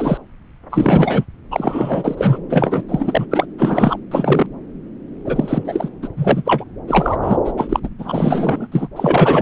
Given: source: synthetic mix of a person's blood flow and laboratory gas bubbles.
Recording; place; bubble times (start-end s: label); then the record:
Doppler ultrasound of blood flow; subclavian vein
0.00-0.17 s: bubbles
0.70-1.25 s: bubbles
1.51-2.39 s: bubbles
2.50-2.83 s: bubbles
2.89-3.26 s: bubbles
3.31-3.46 s: bubbles
3.58-3.99 s: bubbles
4.11-4.46 s: bubbles
5.25-5.88 s: bubbles
6.02-6.08 s: bubbles
6.16-6.42 s: bubbles
6.45-6.64 s: bubbles
6.88-7.16 s: bubbles
7.22-7.37 s: bubbles
7.45-7.53 s: bubbles
7.57-7.80 s: bubbles
7.83-7.89 s: bubbles
7.99-8.67 s: bubbles
8.71-8.88 s: bubbles
8.96-9.42 s: bubbles
From the record:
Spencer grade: 4 (maximum detectable bubble signal sounding continuously throughout systole and diastole of every cardiac period, and overriding the amplitude of the normal cardiac signals); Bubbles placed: anywhere in the cardiac cycle